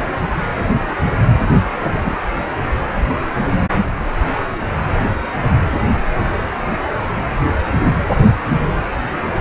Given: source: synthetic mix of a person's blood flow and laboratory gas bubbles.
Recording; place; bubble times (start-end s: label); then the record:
Doppler ultrasound of blood flow; precordium
1.83-1.90 s: bubbles
1.96-2.17 s: bubbles
From the record:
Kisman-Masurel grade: 112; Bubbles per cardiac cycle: 1 to 2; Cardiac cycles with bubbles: 1 to 10%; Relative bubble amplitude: moderate (0.250 to 0.450); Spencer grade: 1 (occasional bubble signal discernible with the cardiac motion signal, with majority of cardiac periods free of bubbles); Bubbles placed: anywhere in the cardiac cycle